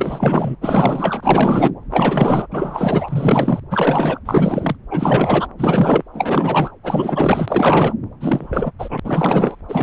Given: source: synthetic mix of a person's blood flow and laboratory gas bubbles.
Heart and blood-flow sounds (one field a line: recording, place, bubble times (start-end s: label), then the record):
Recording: Doppler ultrasound of blood flow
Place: subclavian vein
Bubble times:
0.00-0.55 s: bubbles
0.61-1.72 s: bubbles
1.90-2.46 s: bubbles
2.52-3.60 s: bubbles
3.71-4.20 s: bubbles
4.25-4.76 s: bubbles
4.91-5.48 s: bubbles
5.59-6.03 s: bubbles
6.13-6.71 s: bubbles
6.83-7.94 s: bubbles
8.20-8.71 s: bubbles
8.79-9.00 s: bubbles
9.04-9.55 s: bubbles
9.69-9.83 s: bubbles
From the record:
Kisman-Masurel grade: 444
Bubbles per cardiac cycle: continuous sound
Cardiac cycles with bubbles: 100%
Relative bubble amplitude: maximal (0.775 to 0.999)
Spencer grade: 4 (maximum detectable bubble signal sounding continuously throughout systole and diastole of every cardiac period, and overriding the amplitude of the normal cardiac signals)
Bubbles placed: anywhere in the cardiac cycle